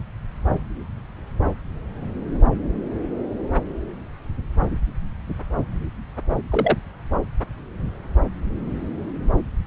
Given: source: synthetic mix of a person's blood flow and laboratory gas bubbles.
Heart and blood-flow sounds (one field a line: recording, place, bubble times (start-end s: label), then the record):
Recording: Doppler ultrasound of blood flow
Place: subclavian vein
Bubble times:
6.51-6.77 s: bubbles
From the record:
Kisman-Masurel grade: 122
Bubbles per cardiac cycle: 1 to 2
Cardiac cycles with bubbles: 10 to 50%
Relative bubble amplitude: moderate (0.250 to 0.450)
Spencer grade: 2 (many but less than half of the cardiac periods contain bubble signals, singularly or in groups)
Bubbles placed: anywhere in the cardiac cycle